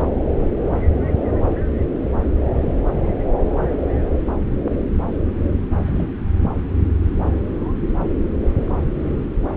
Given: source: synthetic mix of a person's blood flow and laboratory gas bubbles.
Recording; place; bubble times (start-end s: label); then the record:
Doppler ultrasound of blood flow; subclavian vein
5.87-6.07 s: bubbles
From the record:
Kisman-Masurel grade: 111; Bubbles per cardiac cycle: 1 to 2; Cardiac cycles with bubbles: 1 to 10%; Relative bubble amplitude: barely perceptible (0.100 to 0.250); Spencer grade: 1 (occasional bubble signal discernible with the cardiac motion signal, with majority of cardiac periods free of bubbles); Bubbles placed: anywhere in the cardiac cycle